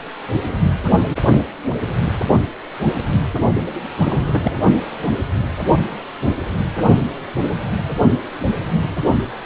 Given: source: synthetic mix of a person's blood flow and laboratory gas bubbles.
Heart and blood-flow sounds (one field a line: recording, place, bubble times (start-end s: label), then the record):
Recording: Doppler ultrasound of blood flow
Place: precordium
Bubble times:
3.95-4.62 s: bubbles
From the record:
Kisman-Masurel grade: 211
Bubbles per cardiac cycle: several, 3 to 8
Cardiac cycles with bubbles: 1 to 10%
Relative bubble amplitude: barely perceptible (0.100 to 0.250)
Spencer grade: 1 (occasional bubble signal discernible with the cardiac motion signal, with majority of cardiac periods free of bubbles)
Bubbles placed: only in the low amplitude regions of the cardiac cycle